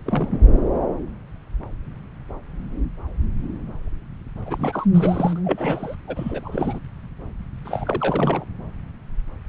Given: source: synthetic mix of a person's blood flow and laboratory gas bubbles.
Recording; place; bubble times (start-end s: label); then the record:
Doppler ultrasound of blood flow; subclavian vein
0.05-0.43 s: bubbles
4.46-4.86 s: bubbles
4.91-5.41 s: bubbles
5.44-5.95 s: bubbles
6.08-6.79 s: bubbles
7.65-8.44 s: bubbles
From the record:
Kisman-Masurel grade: 332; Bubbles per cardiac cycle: rolling drumbeat, 9 or more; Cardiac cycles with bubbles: 50 to 99%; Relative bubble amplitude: moderate (0.250 to 0.450); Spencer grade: 3 (all of the cardiac periods contain showers or single bubble signals, but not dominating or overriding the cardiac motion signals); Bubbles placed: anywhere in the cardiac cycle